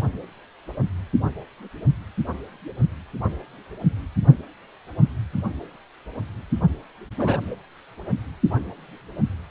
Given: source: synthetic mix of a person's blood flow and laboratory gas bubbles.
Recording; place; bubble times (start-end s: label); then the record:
Doppler ultrasound of blood flow; precordium
7.17-7.38 s: bubbles
From the record:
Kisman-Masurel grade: 112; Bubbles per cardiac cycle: 1 to 2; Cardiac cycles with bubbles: 1 to 10%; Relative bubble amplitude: moderate (0.250 to 0.450); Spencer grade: 1 (occasional bubble signal discernible with the cardiac motion signal, with majority of cardiac periods free of bubbles); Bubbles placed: only in the low amplitude regions of the cardiac cycle